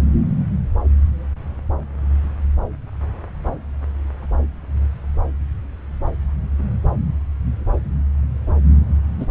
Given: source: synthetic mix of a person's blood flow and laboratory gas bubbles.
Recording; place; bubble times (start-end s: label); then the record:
Doppler ultrasound of blood flow; subclavian vein
9.19-9.26 s: bubbles
From the record:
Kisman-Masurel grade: 113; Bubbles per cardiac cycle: 1 to 2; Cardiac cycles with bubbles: 1 to 10%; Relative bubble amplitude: loud (0.450 to 0.775); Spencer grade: 1 (occasional bubble signal discernible with the cardiac motion signal, with majority of cardiac periods free of bubbles); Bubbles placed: anywhere in the cardiac cycle